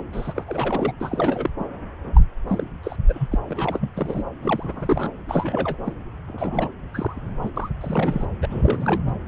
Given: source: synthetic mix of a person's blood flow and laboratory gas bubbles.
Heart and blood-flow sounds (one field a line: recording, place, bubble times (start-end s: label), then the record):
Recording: Doppler ultrasound of blood flow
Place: subclavian vein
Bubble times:
0.00-0.03 s: bubbles
0.12-0.44 s: bubbles
0.47-0.93 s: bubbles
1.00-1.50 s: bubbles
1.58-1.65 s: bubbles
2.14-2.22 s: bubbles
2.48-2.66 s: bubbles
2.83-2.96 s: bubbles
3.08-3.29 s: bubbles
3.31-3.38 s: bubbles
3.48-3.90 s: bubbles
3.94-4.24 s: bubbles
4.42-5.10 s: bubbles
5.29-5.78 s: bubbles
5.85-5.93 s: bubbles
6.28-6.70 s: bubbles
6.94-7.50 s: bubbles
7.56-7.70 s: bubbles
7.80-8.27 s: bubbles
8.41-9.01 s: bubbles
9.06-9.13 s: bubbles
From the record:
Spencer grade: 3 (all of the cardiac periods contain showers or single bubble signals, but not dominating or overriding the cardiac motion signals)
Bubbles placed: anywhere in the cardiac cycle